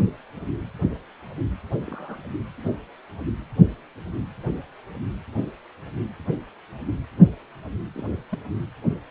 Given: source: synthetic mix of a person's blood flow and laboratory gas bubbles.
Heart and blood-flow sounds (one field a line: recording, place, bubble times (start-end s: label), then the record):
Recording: Doppler ultrasound of blood flow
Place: precordium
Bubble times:
1.86-2.19 s: bubbles
7.95-8.12 s: bubbles
8.31-8.38 s: bubbles
From the record:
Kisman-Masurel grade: 121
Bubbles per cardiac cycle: 1 to 2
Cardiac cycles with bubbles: 10 to 50%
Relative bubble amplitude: barely perceptible (0.100 to 0.250)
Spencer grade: 2 (many but less than half of the cardiac periods contain bubble signals, singularly or in groups)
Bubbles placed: anywhere in the cardiac cycle